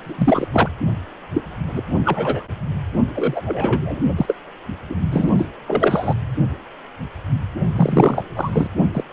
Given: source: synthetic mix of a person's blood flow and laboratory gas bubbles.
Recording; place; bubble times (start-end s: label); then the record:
Doppler ultrasound of blood flow; precordium
0.03-0.48 s: bubbles
0.52-0.69 s: bubbles
1.33-1.42 s: bubbles
1.68-1.82 s: bubbles
2.04-2.45 s: bubbles
3.15-3.42 s: bubbles
3.46-4.14 s: bubbles
4.17-4.36 s: bubbles
4.89-4.95 s: bubbles
5.11-5.31 s: bubbles
5.38-5.46 s: bubbles
5.67-6.15 s: bubbles
7.75-8.25 s: bubbles
8.36-8.67 s: bubbles
8.94-9.04 s: bubbles
From the record:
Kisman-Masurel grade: 233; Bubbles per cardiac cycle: several, 3 to 8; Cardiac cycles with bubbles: 50 to 99%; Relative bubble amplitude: loud (0.450 to 0.775); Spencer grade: 3 (all of the cardiac periods contain showers or single bubble signals, but not dominating or overriding the cardiac motion signals); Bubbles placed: only in the low amplitude regions of the cardiac cycle